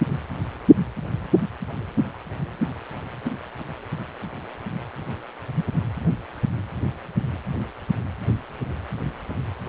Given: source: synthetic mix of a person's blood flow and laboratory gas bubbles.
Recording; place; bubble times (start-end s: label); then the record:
Doppler ultrasound of blood flow; precordium
no bubbles
From the record:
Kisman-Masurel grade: 000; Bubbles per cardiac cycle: 0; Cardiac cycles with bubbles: 0%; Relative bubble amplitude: no bubbles discernible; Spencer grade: 0 (complete lack of bubble signals)